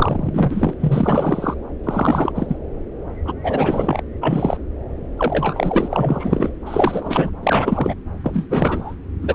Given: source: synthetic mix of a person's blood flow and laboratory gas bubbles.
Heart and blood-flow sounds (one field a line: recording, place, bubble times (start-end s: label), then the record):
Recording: Doppler ultrasound of blood flow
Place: subclavian vein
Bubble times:
0.00-0.73 s: bubbles
0.80-1.54 s: bubbles
1.83-2.32 s: bubbles
2.35-2.57 s: bubbles
3.25-3.33 s: bubbles
3.44-4.01 s: bubbles
4.21-4.57 s: bubbles
5.17-6.52 s: bubbles
6.66-7.30 s: bubbles
7.43-7.95 s: bubbles
8.23-8.46 s: bubbles
8.50-8.94 s: bubbles
9.22-9.35 s: bubbles
From the record:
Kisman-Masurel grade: 343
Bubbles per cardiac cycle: rolling drumbeat, 9 or more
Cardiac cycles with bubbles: 100%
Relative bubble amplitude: loud (0.450 to 0.775)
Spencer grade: 3 (all of the cardiac periods contain showers or single bubble signals, but not dominating or overriding the cardiac motion signals)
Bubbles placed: anywhere in the cardiac cycle